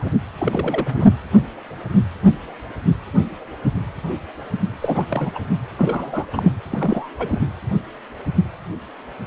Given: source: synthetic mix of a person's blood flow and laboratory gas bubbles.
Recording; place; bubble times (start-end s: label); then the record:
Doppler ultrasound of blood flow; precordium
0.00-0.14 s: bubbles
0.38-1.07 s: bubbles
4.81-5.07 s: bubbles
5.09-5.31 s: bubbles
5.34-5.39 s: bubbles
5.77-6.26 s: bubbles
6.33-6.51 s: bubbles
6.71-7.09 s: bubbles
7.17-7.39 s: bubbles
From the record:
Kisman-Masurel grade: 222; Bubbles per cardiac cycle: several, 3 to 8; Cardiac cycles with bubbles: 10 to 50%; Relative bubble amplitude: moderate (0.250 to 0.450); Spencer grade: 2 (many but less than half of the cardiac periods contain bubble signals, singularly or in groups); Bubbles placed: anywhere in the cardiac cycle